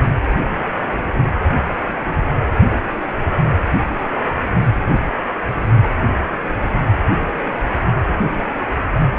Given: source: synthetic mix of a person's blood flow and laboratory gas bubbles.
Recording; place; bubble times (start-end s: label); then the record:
Doppler ultrasound of blood flow; precordium
no bubbles
From the record:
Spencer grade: 0 (complete lack of bubble signals)